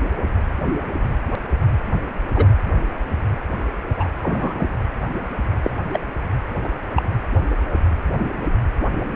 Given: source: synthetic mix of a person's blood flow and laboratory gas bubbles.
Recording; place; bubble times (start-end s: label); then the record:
Doppler ultrasound of blood flow; precordium
2.35-2.46 s: bubbles
3.97-4.08 s: bubbles
4.22-4.66 s: bubbles
5.63-5.70 s: bubbles
5.92-6.00 s: bubbles
6.63-6.69 s: bubbles
6.95-7.03 s: bubbles
From the record:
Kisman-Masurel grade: 122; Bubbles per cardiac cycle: 1 to 2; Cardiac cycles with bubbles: 10 to 50%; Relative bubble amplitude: moderate (0.250 to 0.450); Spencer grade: 2 (many but less than half of the cardiac periods contain bubble signals, singularly or in groups); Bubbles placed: anywhere in the cardiac cycle